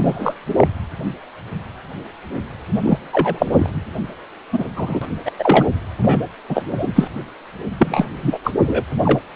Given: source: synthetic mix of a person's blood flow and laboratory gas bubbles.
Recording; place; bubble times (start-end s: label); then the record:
Doppler ultrasound of blood flow; precordium
0.00-0.34 s: bubbles
0.56-0.68 s: bubbles
2.83-2.98 s: bubbles
3.12-3.70 s: bubbles
4.52-4.64 s: bubbles
4.76-5.05 s: bubbles
5.25-5.32 s: bubbles
5.39-5.65 s: bubbles
6.02-6.20 s: bubbles
6.49-6.63 s: bubbles
6.77-6.92 s: bubbles
6.95-7.09 s: bubbles
7.79-8.08 s: bubbles
8.22-8.38 s: bubbles
8.44-8.52 s: bubbles
8.66-8.85 s: bubbles
9.04-9.20 s: bubbles
From the record:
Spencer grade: 3 (all of the cardiac periods contain showers or single bubble signals, but not dominating or overriding the cardiac motion signals); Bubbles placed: anywhere in the cardiac cycle